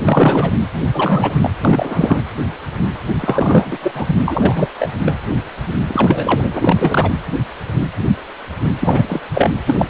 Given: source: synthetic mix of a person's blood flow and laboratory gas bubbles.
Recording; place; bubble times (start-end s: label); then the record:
Doppler ultrasound of blood flow; precordium
0.01-0.52 s: bubbles
0.93-1.50 s: bubbles
1.64-2.22 s: bubbles
3.20-3.77 s: bubbles
3.82-3.92 s: bubbles
3.94-4.15 s: bubbles
4.25-4.67 s: bubbles
4.79-4.89 s: bubbles
4.99-5.17 s: bubbles
5.88-6.48 s: bubbles
6.53-7.11 s: bubbles
8.80-9.21 s: bubbles
9.33-9.51 s: bubbles
9.66-9.87 s: bubbles
From the record:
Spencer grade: 3 (all of the cardiac periods contain showers or single bubble signals, but not dominating or overriding the cardiac motion signals); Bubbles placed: anywhere in the cardiac cycle